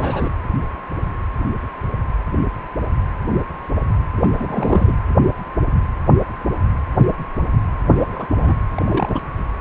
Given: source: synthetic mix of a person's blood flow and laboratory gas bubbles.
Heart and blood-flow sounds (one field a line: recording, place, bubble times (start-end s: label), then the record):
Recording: Doppler ultrasound of blood flow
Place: precordium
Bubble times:
0.00-0.29 s: bubbles
4.17-4.95 s: bubbles
7.93-8.26 s: bubbles
8.37-8.55 s: bubbles
8.75-9.20 s: bubbles
From the record:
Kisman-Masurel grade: 222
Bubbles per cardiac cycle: several, 3 to 8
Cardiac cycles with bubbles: 10 to 50%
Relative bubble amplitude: moderate (0.250 to 0.450)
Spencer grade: 2 (many but less than half of the cardiac periods contain bubble signals, singularly or in groups)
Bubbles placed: anywhere in the cardiac cycle